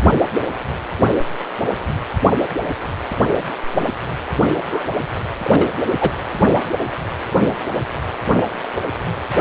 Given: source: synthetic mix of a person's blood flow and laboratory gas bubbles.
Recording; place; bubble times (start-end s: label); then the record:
Doppler ultrasound of blood flow; precordium
4.71-4.83 s: bubbles
5.43-5.68 s: bubbles
6.00-6.11 s: bubbles
From the record:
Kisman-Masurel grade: 213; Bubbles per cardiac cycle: several, 3 to 8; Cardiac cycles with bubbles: 1 to 10%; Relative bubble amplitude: loud (0.450 to 0.775); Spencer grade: 1 (occasional bubble signal discernible with the cardiac motion signal, with majority of cardiac periods free of bubbles); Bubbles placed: only in the low amplitude regions of the cardiac cycle